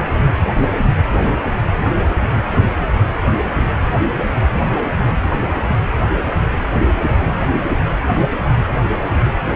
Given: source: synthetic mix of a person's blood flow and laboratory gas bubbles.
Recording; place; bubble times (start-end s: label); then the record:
Doppler ultrasound of blood flow; precordium
6.73-6.87 s: bubbles
7.08-7.19 s: bubbles
From the record:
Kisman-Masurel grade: 111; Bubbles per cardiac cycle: 1 to 2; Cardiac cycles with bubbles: 1 to 10%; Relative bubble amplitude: barely perceptible (0.100 to 0.250); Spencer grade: 1 (occasional bubble signal discernible with the cardiac motion signal, with majority of cardiac periods free of bubbles); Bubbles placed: anywhere in the cardiac cycle